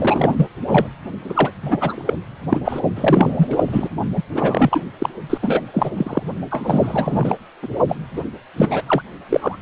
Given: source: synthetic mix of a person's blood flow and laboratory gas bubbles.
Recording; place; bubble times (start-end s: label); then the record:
Doppler ultrasound of blood flow; precordium
0.00-0.47 s: bubbles
0.67-0.87 s: bubbles
1.24-1.52 s: bubbles
1.62-1.78 s: bubbles
1.80-2.19 s: bubbles
2.49-2.60 s: bubbles
2.65-2.81 s: bubbles
2.96-3.88 s: bubbles
4.16-4.23 s: bubbles
4.32-4.82 s: bubbles
4.99-5.09 s: bubbles
5.29-5.38 s: bubbles
5.42-5.62 s: bubbles
5.74-5.91 s: bubbles
5.96-6.23 s: bubbles
6.50-7.36 s: bubbles
7.62-7.68 s: bubbles
7.88-7.96 s: bubbles
8.13-8.23 s: bubbles
8.56-8.83 s: bubbles
8.86-9.02 s: bubbles
9.29-9.57 s: bubbles
From the record:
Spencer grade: 3 (all of the cardiac periods contain showers or single bubble signals, but not dominating or overriding the cardiac motion signals); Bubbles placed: only in the low amplitude regions of the cardiac cycle